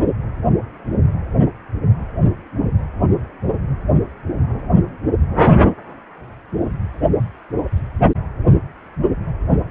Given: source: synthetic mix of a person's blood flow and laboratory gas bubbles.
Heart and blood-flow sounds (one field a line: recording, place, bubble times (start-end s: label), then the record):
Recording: Doppler ultrasound of blood flow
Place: precordium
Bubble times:
no bubbles
From the record:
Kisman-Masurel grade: 000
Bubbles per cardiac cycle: 0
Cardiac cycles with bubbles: 0%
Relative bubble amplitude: no bubbles discernible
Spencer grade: 0 (complete lack of bubble signals)